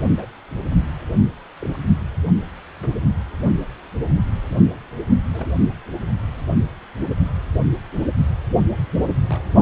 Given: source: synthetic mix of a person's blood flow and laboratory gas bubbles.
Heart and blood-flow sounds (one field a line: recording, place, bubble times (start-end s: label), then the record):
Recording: Doppler ultrasound of blood flow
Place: precordium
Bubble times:
0.18-0.26 s: bubbles
1.61-1.77 s: bubbles
2.82-2.88 s: bubbles
5.32-5.46 s: bubbles
8.58-8.64 s: bubbles
9.29-9.44 s: bubbles
From the record:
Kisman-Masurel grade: 121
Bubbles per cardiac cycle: 1 to 2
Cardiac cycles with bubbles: 10 to 50%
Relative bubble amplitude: barely perceptible (0.100 to 0.250)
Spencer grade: 2 (many but less than half of the cardiac periods contain bubble signals, singularly or in groups)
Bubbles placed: only in the low amplitude regions of the cardiac cycle